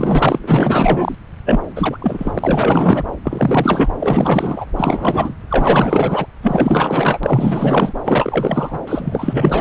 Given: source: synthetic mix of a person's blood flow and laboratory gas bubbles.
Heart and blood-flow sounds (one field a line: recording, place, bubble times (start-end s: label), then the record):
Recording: Doppler ultrasound of blood flow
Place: subclavian vein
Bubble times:
0.00-0.39 s: bubbles
0.42-1.15 s: bubbles
1.45-1.59 s: bubbles
1.76-1.97 s: bubbles
2.02-3.04 s: bubbles
3.24-3.90 s: bubbles
4.00-4.65 s: bubbles
4.76-5.35 s: bubbles
5.50-6.26 s: bubbles
6.43-7.19 s: bubbles
7.23-7.93 s: bubbles
8.04-8.79 s: bubbles
8.87-9.61 s: bubbles
From the record:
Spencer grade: 4 (maximum detectable bubble signal sounding continuously throughout systole and diastole of every cardiac period, and overriding the amplitude of the normal cardiac signals)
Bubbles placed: anywhere in the cardiac cycle